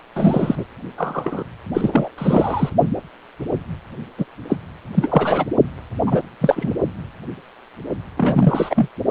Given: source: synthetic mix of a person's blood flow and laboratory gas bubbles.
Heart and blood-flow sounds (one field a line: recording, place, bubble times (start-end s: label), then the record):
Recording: Doppler ultrasound of blood flow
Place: precordium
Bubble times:
0.15-0.65 s: bubbles
0.98-1.44 s: bubbles
1.74-2.09 s: bubbles
2.18-2.69 s: bubbles
4.18-4.25 s: bubbles
4.49-4.56 s: bubbles
4.94-5.44 s: bubbles
6.06-6.22 s: bubbles
6.41-6.72 s: bubbles
8.17-8.89 s: bubbles
From the record:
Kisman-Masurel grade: 233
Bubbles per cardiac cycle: several, 3 to 8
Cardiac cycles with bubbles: 50 to 99%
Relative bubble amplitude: loud (0.450 to 0.775)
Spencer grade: 3 (all of the cardiac periods contain showers or single bubble signals, but not dominating or overriding the cardiac motion signals)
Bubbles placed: only in the low amplitude regions of the cardiac cycle